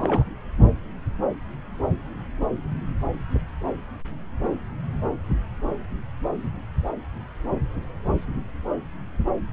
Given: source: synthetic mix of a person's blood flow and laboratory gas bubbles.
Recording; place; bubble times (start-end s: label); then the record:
Doppler ultrasound of blood flow; subclavian vein
0.00-0.24 s: bubbles
From the record:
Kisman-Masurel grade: 212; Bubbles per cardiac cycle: several, 3 to 8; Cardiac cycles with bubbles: 1 to 10%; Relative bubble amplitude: moderate (0.250 to 0.450); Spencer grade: 1 (occasional bubble signal discernible with the cardiac motion signal, with majority of cardiac periods free of bubbles); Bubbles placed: anywhere in the cardiac cycle